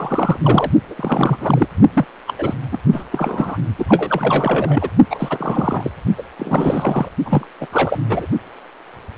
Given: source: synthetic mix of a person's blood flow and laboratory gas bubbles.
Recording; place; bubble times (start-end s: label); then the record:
Doppler ultrasound of blood flow; precordium
0.00-0.41 s: bubbles
0.43-0.71 s: bubbles
0.90-1.38 s: bubbles
1.40-1.67 s: bubbles
1.94-2.06 s: bubbles
2.27-2.33 s: bubbles
2.38-2.54 s: bubbles
2.72-2.78 s: bubbles
2.92-3.04 s: bubbles
3.12-3.58 s: bubbles
3.78-3.85 s: bubbles
3.88-4.89 s: bubbles
5.09-5.92 s: bubbles
6.17-6.22 s: bubbles
6.39-7.08 s: bubbles
7.24-7.47 s: bubbles
7.61-7.66 s: bubbles
7.72-8.01 s: bubbles
8.08-8.27 s: bubbles
From the record:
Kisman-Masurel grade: 333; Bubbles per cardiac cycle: rolling drumbeat, 9 or more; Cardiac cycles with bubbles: 50 to 99%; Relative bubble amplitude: loud (0.450 to 0.775); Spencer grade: 3 (all of the cardiac periods contain showers or single bubble signals, but not dominating or overriding the cardiac motion signals); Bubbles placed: only in the low amplitude regions of the cardiac cycle